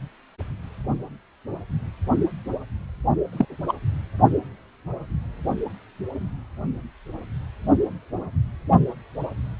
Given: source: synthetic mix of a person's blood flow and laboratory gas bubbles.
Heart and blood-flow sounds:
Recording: Doppler ultrasound of blood flow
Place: precordium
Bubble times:
3.32-3.45 s: bubbles
3.68-3.73 s: bubbles
From the record:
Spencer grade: 1 (occasional bubble signal discernible with the cardiac motion signal, with majority of cardiac periods free of bubbles)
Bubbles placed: only in the low amplitude regions of the cardiac cycle

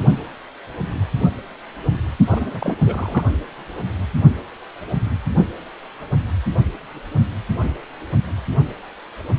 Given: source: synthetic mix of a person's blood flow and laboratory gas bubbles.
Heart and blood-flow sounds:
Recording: Doppler ultrasound of blood flow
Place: precordium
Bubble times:
2.28-2.78 s: bubbles
2.85-3.24 s: bubbles
From the record:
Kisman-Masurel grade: 212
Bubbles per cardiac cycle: several, 3 to 8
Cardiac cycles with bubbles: 1 to 10%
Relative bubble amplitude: moderate (0.250 to 0.450)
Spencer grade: 1 (occasional bubble signal discernible with the cardiac motion signal, with majority of cardiac periods free of bubbles)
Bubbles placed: only in the low amplitude regions of the cardiac cycle

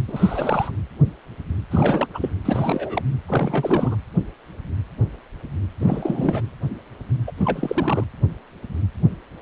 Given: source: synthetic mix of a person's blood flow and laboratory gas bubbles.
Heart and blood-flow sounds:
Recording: Doppler ultrasound of blood flow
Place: precordium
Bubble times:
0.07-0.71 s: bubbles
1.71-2.07 s: bubbles
2.14-2.31 s: bubbles
2.45-3.02 s: bubbles
3.28-3.96 s: bubbles
5.79-6.42 s: bubbles
7.27-7.32 s: bubbles
7.37-8.04 s: bubbles
From the record:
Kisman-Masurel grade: 332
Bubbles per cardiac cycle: rolling drumbeat, 9 or more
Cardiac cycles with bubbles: 50 to 99%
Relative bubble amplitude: moderate (0.250 to 0.450)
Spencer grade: 3 (all of the cardiac periods contain showers or single bubble signals, but not dominating or overriding the cardiac motion signals)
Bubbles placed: anywhere in the cardiac cycle

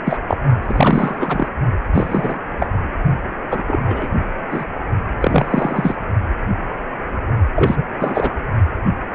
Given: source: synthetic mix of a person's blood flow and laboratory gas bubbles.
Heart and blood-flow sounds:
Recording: Doppler ultrasound of blood flow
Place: precordium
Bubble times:
0.05-0.17 s: bubbles
0.28-0.37 s: bubbles
0.63-1.48 s: bubbles
1.94-2.39 s: bubbles
2.60-2.67 s: bubbles
3.50-3.62 s: bubbles
3.67-4.08 s: bubbles
4.50-4.65 s: bubbles
5.21-5.95 s: bubbles
7.55-7.85 s: bubbles
7.99-8.33 s: bubbles
From the record:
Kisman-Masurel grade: 233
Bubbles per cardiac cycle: several, 3 to 8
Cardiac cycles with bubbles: 50 to 99%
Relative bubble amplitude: loud (0.450 to 0.775)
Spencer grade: 3 (all of the cardiac periods contain showers or single bubble signals, but not dominating or overriding the cardiac motion signals)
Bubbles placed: only in the low amplitude regions of the cardiac cycle

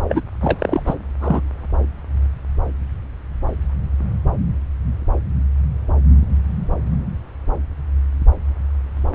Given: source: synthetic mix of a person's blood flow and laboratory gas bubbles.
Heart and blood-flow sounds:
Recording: Doppler ultrasound of blood flow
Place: subclavian vein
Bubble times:
0.08-0.21 s: bubbles
0.41-0.82 s: bubbles
0.85-0.94 s: bubbles
1.20-1.41 s: bubbles
From the record:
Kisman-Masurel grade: 213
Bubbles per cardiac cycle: several, 3 to 8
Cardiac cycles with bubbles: 1 to 10%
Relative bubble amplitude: loud (0.450 to 0.775)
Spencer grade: 1 (occasional bubble signal discernible with the cardiac motion signal, with majority of cardiac periods free of bubbles)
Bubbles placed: anywhere in the cardiac cycle

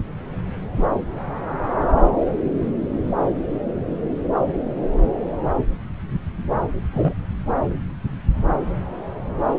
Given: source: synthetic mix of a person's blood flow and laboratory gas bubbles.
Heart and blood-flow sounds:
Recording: Doppler ultrasound of blood flow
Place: subclavian vein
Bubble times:
6.94-7.13 s: bubbles
From the record:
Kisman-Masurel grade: 113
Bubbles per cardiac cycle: 1 to 2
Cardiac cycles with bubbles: 1 to 10%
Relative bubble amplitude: loud (0.450 to 0.775)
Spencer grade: 1 (occasional bubble signal discernible with the cardiac motion signal, with majority of cardiac periods free of bubbles)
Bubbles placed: anywhere in the cardiac cycle

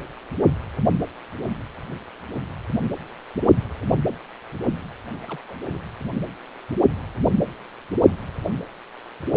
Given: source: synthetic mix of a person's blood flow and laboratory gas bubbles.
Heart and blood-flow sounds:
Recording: Doppler ultrasound of blood flow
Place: precordium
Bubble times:
5.22-5.40 s: bubbles
5.47-5.55 s: bubbles
5.65-5.79 s: bubbles
From the record:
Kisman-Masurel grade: 221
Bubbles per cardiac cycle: several, 3 to 8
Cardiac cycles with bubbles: 10 to 50%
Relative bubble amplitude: barely perceptible (0.100 to 0.250)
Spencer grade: 2 (many but less than half of the cardiac periods contain bubble signals, singularly or in groups)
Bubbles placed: anywhere in the cardiac cycle

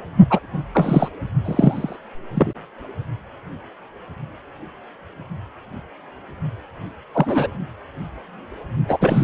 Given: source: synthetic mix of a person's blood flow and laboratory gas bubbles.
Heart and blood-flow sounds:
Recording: Doppler ultrasound of blood flow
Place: precordium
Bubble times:
0.30-0.39 s: bubbles
0.73-1.08 s: bubbles
1.44-1.97 s: bubbles
2.35-2.53 s: bubbles
7.14-7.47 s: bubbles
8.88-9.24 s: bubbles
From the record:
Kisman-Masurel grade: 223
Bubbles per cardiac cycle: several, 3 to 8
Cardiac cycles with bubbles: 10 to 50%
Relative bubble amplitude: loud (0.450 to 0.775)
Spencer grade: 2 (many but less than half of the cardiac periods contain bubble signals, singularly or in groups)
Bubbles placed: only in the low amplitude regions of the cardiac cycle

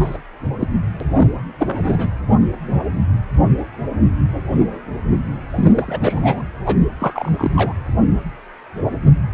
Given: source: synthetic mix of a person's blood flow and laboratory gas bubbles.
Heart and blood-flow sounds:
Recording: Doppler ultrasound of blood flow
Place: precordium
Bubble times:
0.00-0.17 s: bubbles
0.60-0.67 s: bubbles
1.00-1.04 s: bubbles
1.16-1.28 s: bubbles
1.58-2.11 s: bubbles
5.49-5.98 s: bubbles
6.01-6.42 s: bubbles
6.66-6.76 s: bubbles
7.00-7.73 s: bubbles
From the record:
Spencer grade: 2 (many but less than half of the cardiac periods contain bubble signals, singularly or in groups)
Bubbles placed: anywhere in the cardiac cycle

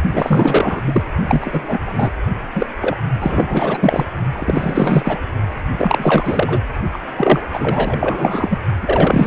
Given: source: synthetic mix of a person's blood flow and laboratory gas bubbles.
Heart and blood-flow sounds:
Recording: Doppler ultrasound of blood flow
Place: precordium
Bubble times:
0.12-0.81 s: bubbles
0.86-1.04 s: bubbles
1.24-1.79 s: bubbles
1.85-2.11 s: bubbles
2.54-2.67 s: bubbles
2.81-2.96 s: bubbles
3.19-4.05 s: bubbles
4.32-5.21 s: bubbles
5.77-6.61 s: bubbles
6.92-6.98 s: bubbles
7.17-7.42 s: bubbles
7.53-8.58 s: bubbles
8.82-9.27 s: bubbles
From the record:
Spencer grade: 4 (maximum detectable bubble signal sounding continuously throughout systole and diastole of every cardiac period, and overriding the amplitude of the normal cardiac signals)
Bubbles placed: only in the low amplitude regions of the cardiac cycle

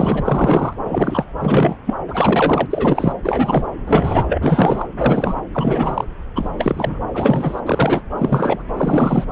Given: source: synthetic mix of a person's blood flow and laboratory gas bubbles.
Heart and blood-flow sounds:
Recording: Doppler ultrasound of blood flow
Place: subclavian vein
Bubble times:
0.00-0.75 s: bubbles
0.84-1.25 s: bubbles
1.40-1.76 s: bubbles
1.86-1.94 s: bubbles
2.08-2.67 s: bubbles
2.69-3.13 s: bubbles
3.23-3.64 s: bubbles
3.87-4.38 s: bubbles
4.41-4.88 s: bubbles
4.97-5.34 s: bubbles
5.54-6.04 s: bubbles
6.35-6.51 s: bubbles
6.58-7.02 s: bubbles
7.14-7.60 s: bubbles
7.66-8.01 s: bubbles
8.18-8.62 s: bubbles
8.77-9.24 s: bubbles
From the record:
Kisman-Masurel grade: 342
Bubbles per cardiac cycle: rolling drumbeat, 9 or more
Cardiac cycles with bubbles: 100%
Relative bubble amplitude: moderate (0.250 to 0.450)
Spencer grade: 3 (all of the cardiac periods contain showers or single bubble signals, but not dominating or overriding the cardiac motion signals)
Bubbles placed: anywhere in the cardiac cycle

